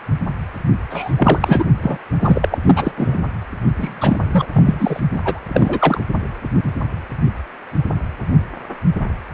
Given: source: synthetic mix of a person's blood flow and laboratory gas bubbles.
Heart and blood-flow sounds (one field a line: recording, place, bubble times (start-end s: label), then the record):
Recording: Doppler ultrasound of blood flow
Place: precordium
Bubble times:
0.90-1.14 s: bubbles
1.16-1.64 s: bubbles
1.82-1.98 s: bubbles
2.21-2.48 s: bubbles
2.51-2.57 s: bubbles
2.65-2.93 s: bubbles
2.97-3.19 s: bubbles
3.75-4.19 s: bubbles
4.32-4.48 s: bubbles
4.53-5.00 s: bubbles
5.14-5.20 s: bubbles
5.24-5.40 s: bubbles
5.49-6.04 s: bubbles
From the record:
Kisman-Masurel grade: 333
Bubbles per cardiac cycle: rolling drumbeat, 9 or more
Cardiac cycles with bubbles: 50 to 99%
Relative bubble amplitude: loud (0.450 to 0.775)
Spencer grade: 3 (all of the cardiac periods contain showers or single bubble signals, but not dominating or overriding the cardiac motion signals)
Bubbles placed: only in the low amplitude regions of the cardiac cycle